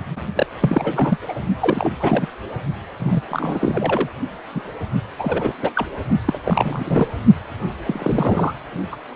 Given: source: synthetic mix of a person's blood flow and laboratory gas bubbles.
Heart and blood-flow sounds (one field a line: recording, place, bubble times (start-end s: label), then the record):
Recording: Doppler ultrasound of blood flow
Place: precordium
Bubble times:
0.35-0.47 s: bubbles
0.61-1.18 s: bubbles
1.29-1.33 s: bubbles
1.59-1.92 s: bubbles
1.99-2.28 s: bubbles
2.99-3.21 s: bubbles
3.30-4.10 s: bubbles
4.54-4.62 s: bubbles
5.19-5.54 s: bubbles
5.62-5.71 s: bubbles
5.75-5.86 s: bubbles
6.27-6.39 s: bubbles
6.44-7.07 s: bubbles
7.86-8.54 s: bubbles
8.92-8.96 s: bubbles
From the record:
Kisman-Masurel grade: 242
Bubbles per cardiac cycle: several, 3 to 8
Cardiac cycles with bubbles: 100%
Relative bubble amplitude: moderate (0.250 to 0.450)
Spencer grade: 3 (all of the cardiac periods contain showers or single bubble signals, but not dominating or overriding the cardiac motion signals)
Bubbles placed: only in the low amplitude regions of the cardiac cycle